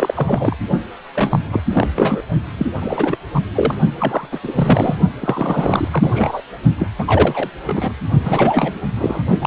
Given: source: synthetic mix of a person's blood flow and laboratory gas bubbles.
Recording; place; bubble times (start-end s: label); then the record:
Doppler ultrasound of blood flow; precordium
0.00-0.56 s: bubbles
1.13-1.60 s: bubbles
1.71-1.88 s: bubbles
1.96-2.22 s: bubbles
2.58-2.67 s: bubbles
2.81-3.18 s: bubbles
3.34-3.40 s: bubbles
3.54-3.75 s: bubbles
3.95-4.29 s: bubbles
4.32-4.41 s: bubbles
4.43-4.96 s: bubbles
5.20-5.88 s: bubbles
5.92-6.42 s: bubbles
6.78-6.87 s: bubbles
6.99-7.50 s: bubbles
7.66-7.93 s: bubbles
8.23-8.79 s: bubbles
8.96-9.22 s: bubbles
9.40-9.47 s: bubbles
From the record:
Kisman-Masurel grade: 343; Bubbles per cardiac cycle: rolling drumbeat, 9 or more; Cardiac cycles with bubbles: 100%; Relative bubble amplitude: loud (0.450 to 0.775); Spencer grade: 3 (all of the cardiac periods contain showers or single bubble signals, but not dominating or overriding the cardiac motion signals); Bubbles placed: only in the low amplitude regions of the cardiac cycle